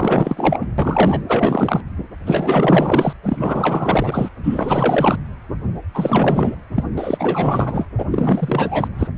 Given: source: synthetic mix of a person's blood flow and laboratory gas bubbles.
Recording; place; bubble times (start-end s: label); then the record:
Doppler ultrasound of blood flow; precordium
0.00-0.67 s: bubbles
0.78-1.21 s: bubbles
1.28-1.82 s: bubbles
2.26-3.13 s: bubbles
3.24-4.29 s: bubbles
4.43-5.17 s: bubbles
5.94-6.56 s: bubbles
6.75-6.86 s: bubbles
6.96-7.87 s: bubbles
7.98-8.05 s: bubbles
8.11-8.88 s: bubbles
8.98-9.10 s: bubbles
From the record:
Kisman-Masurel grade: 444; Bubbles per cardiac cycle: continuous sound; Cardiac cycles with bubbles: 100%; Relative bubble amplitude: maximal (0.775 to 0.999); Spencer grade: 4 (maximum detectable bubble signal sounding continuously throughout systole and diastole of every cardiac period, and overriding the amplitude of the normal cardiac signals); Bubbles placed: anywhere in the cardiac cycle